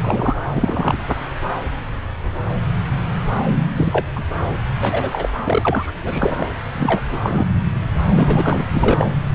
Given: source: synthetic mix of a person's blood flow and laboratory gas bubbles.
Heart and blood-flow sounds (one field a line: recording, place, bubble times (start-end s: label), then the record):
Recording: Doppler ultrasound of blood flow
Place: subclavian vein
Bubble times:
0.00-0.37 s: bubbles
0.56-0.97 s: bubbles
3.75-4.05 s: bubbles
4.16-4.23 s: bubbles
4.81-5.29 s: bubbles
5.44-5.92 s: bubbles
6.03-6.51 s: bubbles
6.75-7.02 s: bubbles
7.11-7.46 s: bubbles
8.13-8.64 s: bubbles
8.71-9.12 s: bubbles
From the record:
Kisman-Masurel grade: 232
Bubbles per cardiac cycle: several, 3 to 8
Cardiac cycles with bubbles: 50 to 99%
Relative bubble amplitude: moderate (0.250 to 0.450)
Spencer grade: 3 (all of the cardiac periods contain showers or single bubble signals, but not dominating or overriding the cardiac motion signals)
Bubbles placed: anywhere in the cardiac cycle